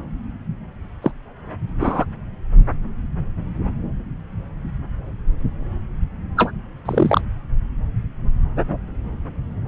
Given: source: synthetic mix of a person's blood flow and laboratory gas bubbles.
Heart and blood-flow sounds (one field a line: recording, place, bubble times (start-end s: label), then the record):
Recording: Doppler ultrasound of blood flow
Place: subclavian vein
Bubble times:
1.02-1.11 s: bubbles
1.80-2.05 s: bubbles
6.37-6.51 s: bubbles
6.85-7.21 s: bubbles
From the record:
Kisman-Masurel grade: 123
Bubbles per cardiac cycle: 1 to 2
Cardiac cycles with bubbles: 10 to 50%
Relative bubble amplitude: loud (0.450 to 0.775)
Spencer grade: 2 (many but less than half of the cardiac periods contain bubble signals, singularly or in groups)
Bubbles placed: anywhere in the cardiac cycle